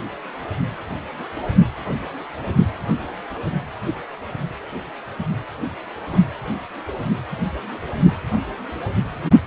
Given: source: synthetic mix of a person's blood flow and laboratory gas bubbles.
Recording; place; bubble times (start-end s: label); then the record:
Doppler ultrasound of blood flow; precordium
6.04-6.37 s: bubbles
7.31-7.38 s: bubbles
From the record:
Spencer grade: 1 (occasional bubble signal discernible with the cardiac motion signal, with majority of cardiac periods free of bubbles); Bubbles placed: anywhere in the cardiac cycle